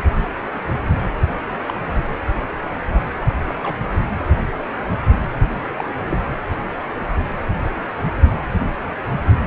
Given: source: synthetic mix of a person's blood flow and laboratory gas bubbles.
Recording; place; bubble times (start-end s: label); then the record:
Doppler ultrasound of blood flow; precordium
1.67-1.84 s: bubbles
3.48-3.54 s: bubbles
3.62-3.77 s: bubbles
5.78-5.88 s: bubbles
6.10-6.17 s: bubbles
From the record:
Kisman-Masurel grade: 121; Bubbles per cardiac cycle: 1 to 2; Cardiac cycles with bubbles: 10 to 50%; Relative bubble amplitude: barely perceptible (0.100 to 0.250); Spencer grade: 2 (many but less than half of the cardiac periods contain bubble signals, singularly or in groups); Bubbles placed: anywhere in the cardiac cycle